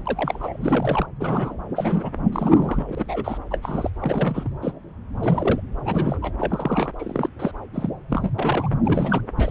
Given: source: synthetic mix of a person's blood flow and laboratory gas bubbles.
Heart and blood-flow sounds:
Doppler ultrasound of blood flow; subclavian vein
0.05-0.56 s: bubbles
0.61-1.06 s: bubbles
1.19-1.54 s: bubbles
1.75-2.10 s: bubbles
2.32-3.38 s: bubbles
3.50-3.58 s: bubbles
3.62-3.90 s: bubbles
4.00-4.50 s: bubbles
4.62-4.74 s: bubbles
5.20-5.61 s: bubbles
5.82-6.33 s: bubbles
6.40-6.90 s: bubbles
6.99-7.29 s: bubbles
7.39-7.52 s: bubbles
7.73-7.90 s: bubbles
8.09-8.31 s: bubbles
8.38-8.70 s: bubbles
8.84-9.21 s: bubbles
9.37-9.51 s: bubbles
From the record:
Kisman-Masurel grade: 242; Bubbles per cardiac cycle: several, 3 to 8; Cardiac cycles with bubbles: 100%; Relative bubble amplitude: moderate (0.250 to 0.450); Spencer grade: 3 (all of the cardiac periods contain showers or single bubble signals, but not dominating or overriding the cardiac motion signals); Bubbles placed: anywhere in the cardiac cycle

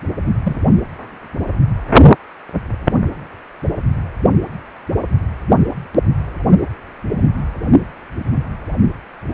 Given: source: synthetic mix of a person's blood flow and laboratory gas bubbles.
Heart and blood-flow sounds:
Doppler ultrasound of blood flow; precordium
0.43-0.56 s: bubbles
From the record:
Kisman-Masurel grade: 112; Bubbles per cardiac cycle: 1 to 2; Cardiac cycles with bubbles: 1 to 10%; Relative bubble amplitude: moderate (0.250 to 0.450); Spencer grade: 1 (occasional bubble signal discernible with the cardiac motion signal, with majority of cardiac periods free of bubbles); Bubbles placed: only in the low amplitude regions of the cardiac cycle

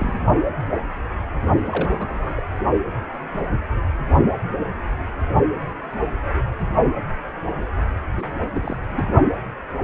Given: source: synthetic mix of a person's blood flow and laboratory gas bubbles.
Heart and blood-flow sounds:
Doppler ultrasound of blood flow; precordium
0.00-0.21 s: bubbles
1.66-2.43 s: bubbles
8.13-8.35 s: bubbles
8.42-8.50 s: bubbles
8.54-8.79 s: bubbles
8.90-9.05 s: bubbles
From the record:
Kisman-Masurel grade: 221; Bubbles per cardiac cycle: several, 3 to 8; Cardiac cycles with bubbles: 10 to 50%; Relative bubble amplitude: barely perceptible (0.100 to 0.250); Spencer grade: 2 (many but less than half of the cardiac periods contain bubble signals, singularly or in groups); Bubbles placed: only in the low amplitude regions of the cardiac cycle

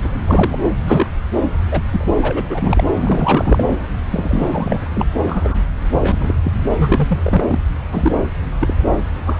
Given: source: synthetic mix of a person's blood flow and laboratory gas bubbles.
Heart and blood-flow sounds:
Doppler ultrasound of blood flow; subclavian vein
0.04-0.10 s: bubbles
0.28-0.59 s: bubbles
0.87-1.07 s: bubbles
1.71-1.82 s: bubbles
1.92-2.06 s: bubbles
2.21-2.44 s: bubbles
2.50-2.83 s: bubbles
2.98-3.77 s: bubbles
4.11-4.87 s: bubbles
4.95-5.08 s: bubbles
5.25-5.56 s: bubbles
6.00-6.34 s: bubbles
6.43-6.52 s: bubbles
6.71-7.58 s: bubbles
7.92-8.11 s: bubbles
8.60-8.74 s: bubbles
9.26-9.39 s: bubbles
From the record:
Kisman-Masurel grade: 232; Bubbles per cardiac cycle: several, 3 to 8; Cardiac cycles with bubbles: 50 to 99%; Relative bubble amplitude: moderate (0.250 to 0.450); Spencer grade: 3 (all of the cardiac periods contain showers or single bubble signals, but not dominating or overriding the cardiac motion signals); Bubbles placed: anywhere in the cardiac cycle

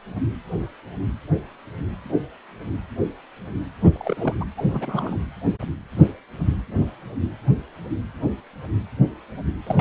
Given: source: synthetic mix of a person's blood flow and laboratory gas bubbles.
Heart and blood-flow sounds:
Doppler ultrasound of blood flow; precordium
3.93-4.34 s: bubbles
4.40-4.45 s: bubbles
4.57-4.64 s: bubbles
4.68-5.16 s: bubbles
9.67-9.81 s: bubbles
From the record:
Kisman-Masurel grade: 221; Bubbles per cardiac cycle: several, 3 to 8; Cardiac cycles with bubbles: 10 to 50%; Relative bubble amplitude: barely perceptible (0.100 to 0.250); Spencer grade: 2 (many but less than half of the cardiac periods contain bubble signals, singularly or in groups); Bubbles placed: anywhere in the cardiac cycle

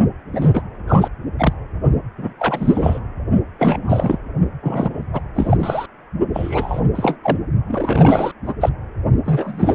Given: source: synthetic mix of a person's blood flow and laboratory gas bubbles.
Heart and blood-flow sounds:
Doppler ultrasound of blood flow; precordium
0.32-0.62 s: bubbles
0.87-1.09 s: bubbles
1.39-1.53 s: bubbles
2.18-2.33 s: bubbles
2.39-2.99 s: bubbles
3.58-4.18 s: bubbles
4.62-5.03 s: bubbles
5.13-5.21 s: bubbles
5.34-5.86 s: bubbles
6.33-6.80 s: bubbles
6.95-7.17 s: bubbles
7.23-7.41 s: bubbles
7.67-8.31 s: bubbles
8.44-8.54 s: bubbles
8.60-8.70 s: bubbles
9.24-9.75 s: bubbles
From the record:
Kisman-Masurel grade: 343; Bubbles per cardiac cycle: rolling drumbeat, 9 or more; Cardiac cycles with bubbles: 100%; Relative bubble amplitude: loud (0.450 to 0.775); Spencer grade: 3 (all of the cardiac periods contain showers or single bubble signals, but not dominating or overriding the cardiac motion signals); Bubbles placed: only in the low amplitude regions of the cardiac cycle

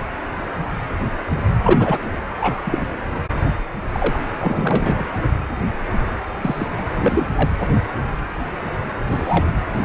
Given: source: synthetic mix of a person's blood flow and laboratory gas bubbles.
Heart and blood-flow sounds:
Doppler ultrasound of blood flow; precordium
1.64-1.98 s: bubbles
2.40-2.61 s: bubbles
2.65-2.86 s: bubbles
3.92-4.21 s: bubbles
4.38-5.05 s: bubbles
6.42-6.67 s: bubbles
6.77-6.83 s: bubbles
6.91-7.26 s: bubbles
7.35-7.50 s: bubbles
9.05-9.45 s: bubbles
9.78-9.85 s: bubbles
From the record:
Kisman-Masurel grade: 233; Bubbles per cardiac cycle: several, 3 to 8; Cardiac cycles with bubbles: 50 to 99%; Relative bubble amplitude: loud (0.450 to 0.775); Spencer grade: 3 (all of the cardiac periods contain showers or single bubble signals, but not dominating or overriding the cardiac motion signals); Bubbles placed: anywhere in the cardiac cycle

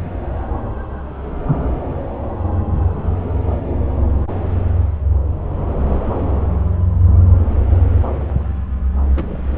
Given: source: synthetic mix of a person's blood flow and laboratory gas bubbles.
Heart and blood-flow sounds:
Doppler ultrasound of blood flow; subclavian vein
9.15-9.42 s: bubbles
From the record:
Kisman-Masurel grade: 211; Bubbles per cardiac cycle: several, 3 to 8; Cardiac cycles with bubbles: 1 to 10%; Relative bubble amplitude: barely perceptible (0.100 to 0.250); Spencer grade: 1 (occasional bubble signal discernible with the cardiac motion signal, with majority of cardiac periods free of bubbles); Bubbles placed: anywhere in the cardiac cycle

